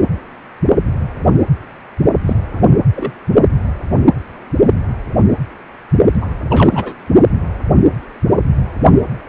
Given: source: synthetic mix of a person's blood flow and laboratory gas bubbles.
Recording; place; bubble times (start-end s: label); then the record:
Doppler ultrasound of blood flow; precordium
2.27-2.35 s: bubbles
2.53-2.67 s: bubbles
2.95-3.12 s: bubbles
6.21-6.26 s: bubbles
6.50-6.94 s: bubbles
From the record:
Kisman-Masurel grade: 223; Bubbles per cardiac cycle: several, 3 to 8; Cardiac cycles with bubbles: 10 to 50%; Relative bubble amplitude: loud (0.450 to 0.775); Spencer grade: 2 (many but less than half of the cardiac periods contain bubble signals, singularly or in groups); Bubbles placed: only in the low amplitude regions of the cardiac cycle